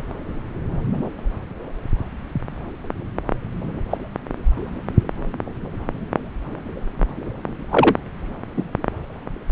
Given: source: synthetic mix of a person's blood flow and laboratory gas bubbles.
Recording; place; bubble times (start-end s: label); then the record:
Doppler ultrasound of blood flow; subclavian vein
3.91-3.97 s: bubbles
7.71-7.96 s: bubbles
8.56-8.63 s: bubbles
From the record:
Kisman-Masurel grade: 123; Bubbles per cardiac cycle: 1 to 2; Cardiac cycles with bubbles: 10 to 50%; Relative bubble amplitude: loud (0.450 to 0.775); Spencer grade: 2 (many but less than half of the cardiac periods contain bubble signals, singularly or in groups); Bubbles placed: anywhere in the cardiac cycle